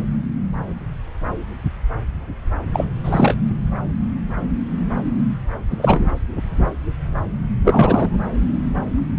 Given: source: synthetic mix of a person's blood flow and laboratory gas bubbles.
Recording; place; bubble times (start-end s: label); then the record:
Doppler ultrasound of blood flow; subclavian vein
2.73-2.84 s: bubbles
3.04-3.38 s: bubbles
5.70-6.07 s: bubbles
7.64-8.20 s: bubbles
From the record:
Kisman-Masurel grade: 223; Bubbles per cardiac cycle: several, 3 to 8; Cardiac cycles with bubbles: 10 to 50%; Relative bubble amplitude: loud (0.450 to 0.775); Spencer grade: 2 (many but less than half of the cardiac periods contain bubble signals, singularly or in groups); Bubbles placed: anywhere in the cardiac cycle